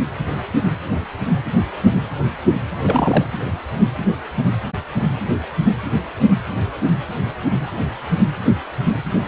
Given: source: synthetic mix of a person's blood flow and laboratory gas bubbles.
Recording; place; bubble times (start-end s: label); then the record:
Doppler ultrasound of blood flow; precordium
2.82-3.25 s: bubbles
From the record:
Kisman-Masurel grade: 212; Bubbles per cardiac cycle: several, 3 to 8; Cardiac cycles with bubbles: 1 to 10%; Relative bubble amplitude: moderate (0.250 to 0.450); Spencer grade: 1 (occasional bubble signal discernible with the cardiac motion signal, with majority of cardiac periods free of bubbles); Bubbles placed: anywhere in the cardiac cycle